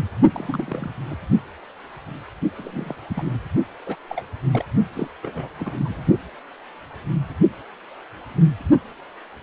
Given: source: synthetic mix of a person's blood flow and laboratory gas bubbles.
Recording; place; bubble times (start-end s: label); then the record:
Doppler ultrasound of blood flow; precordium
0.31-0.91 s: bubbles
1.09-1.17 s: bubbles
2.58-2.96 s: bubbles
3.08-3.38 s: bubbles
3.86-3.96 s: bubbles
4.08-4.25 s: bubbles
4.53-4.65 s: bubbles
4.93-5.08 s: bubbles
5.22-5.49 s: bubbles
5.59-5.74 s: bubbles
5.79-6.04 s: bubbles
From the record:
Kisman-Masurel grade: 221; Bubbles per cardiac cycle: several, 3 to 8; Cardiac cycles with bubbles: 10 to 50%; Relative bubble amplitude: barely perceptible (0.100 to 0.250); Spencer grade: 2 (many but less than half of the cardiac periods contain bubble signals, singularly or in groups); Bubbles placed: only in the low amplitude regions of the cardiac cycle